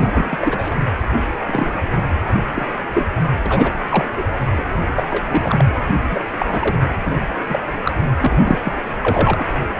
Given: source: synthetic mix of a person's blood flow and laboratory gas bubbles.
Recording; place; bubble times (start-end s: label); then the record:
Doppler ultrasound of blood flow; precordium
0.00-0.38 s: bubbles
0.41-0.77 s: bubbles
1.21-1.26 s: bubbles
1.47-1.91 s: bubbles
2.29-2.44 s: bubbles
2.54-2.67 s: bubbles
2.94-3.06 s: bubbles
3.46-3.72 s: bubbles
3.89-4.05 s: bubbles
4.17-4.24 s: bubbles
4.57-4.65 s: bubbles
4.96-5.04 s: bubbles
5.10-5.25 s: bubbles
5.30-5.67 s: bubbles
6.11-6.19 s: bubbles
6.38-6.46 s: bubbles
6.52-6.78 s: bubbles
7.05-7.12 s: bubbles
7.20-7.28 s: bubbles
7.49-7.59 s: bubbles
7.85-7.91 s: bubbles
8.18-8.73 s: bubbles
9.02-9.47 s: bubbles
From the record:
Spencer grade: 3 (all of the cardiac periods contain showers or single bubble signals, but not dominating or overriding the cardiac motion signals); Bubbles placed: anywhere in the cardiac cycle